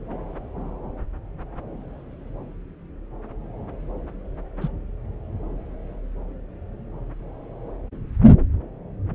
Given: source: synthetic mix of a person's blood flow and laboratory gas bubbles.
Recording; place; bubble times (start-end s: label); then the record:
Doppler ultrasound of blood flow; subclavian vein
4.61-4.69 s: bubbles
From the record:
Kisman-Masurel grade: 112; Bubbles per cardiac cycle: 1 to 2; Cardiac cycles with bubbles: 1 to 10%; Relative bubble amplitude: moderate (0.250 to 0.450); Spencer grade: 1 (occasional bubble signal discernible with the cardiac motion signal, with majority of cardiac periods free of bubbles); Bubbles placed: anywhere in the cardiac cycle